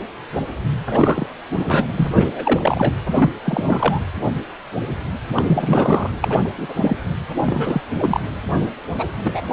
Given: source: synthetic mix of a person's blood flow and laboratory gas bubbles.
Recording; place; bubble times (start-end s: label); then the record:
Doppler ultrasound of blood flow; precordium
0.88-1.27 s: bubbles
1.55-1.87 s: bubbles
1.97-2.96 s: bubbles
3.11-3.30 s: bubbles
3.45-4.04 s: bubbles
5.36-5.42 s: bubbles
5.46-6.10 s: bubbles
6.21-6.40 s: bubbles
6.45-6.49 s: bubbles
6.57-6.97 s: bubbles
7.46-7.82 s: bubbles
7.98-8.20 s: bubbles
8.94-9.12 s: bubbles
9.23-9.41 s: bubbles
9.50-9.53 s: bubbles
From the record:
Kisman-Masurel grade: 333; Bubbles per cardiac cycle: rolling drumbeat, 9 or more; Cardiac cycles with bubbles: 50 to 99%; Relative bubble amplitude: loud (0.450 to 0.775); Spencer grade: 3 (all of the cardiac periods contain showers or single bubble signals, but not dominating or overriding the cardiac motion signals); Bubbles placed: anywhere in the cardiac cycle